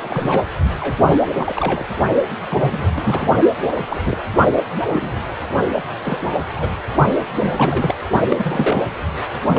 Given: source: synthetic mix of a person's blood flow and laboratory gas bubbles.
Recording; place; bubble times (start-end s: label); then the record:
Doppler ultrasound of blood flow; precordium
0.01-0.46 s: bubbles
0.80-0.97 s: bubbles
1.33-1.86 s: bubbles
2.49-2.90 s: bubbles
2.94-3.27 s: bubbles
3.88-4.01 s: bubbles
4.05-4.18 s: bubbles
4.89-5.22 s: bubbles
5.73-5.82 s: bubbles
6.02-6.38 s: bubbles
6.55-6.70 s: bubbles
7.37-8.02 s: bubbles
8.29-8.86 s: bubbles
9.47-9.59 s: bubbles
From the record:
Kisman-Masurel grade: 242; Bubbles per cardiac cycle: several, 3 to 8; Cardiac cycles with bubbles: 100%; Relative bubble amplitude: moderate (0.250 to 0.450); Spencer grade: 3 (all of the cardiac periods contain showers or single bubble signals, but not dominating or overriding the cardiac motion signals); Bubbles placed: only in the low amplitude regions of the cardiac cycle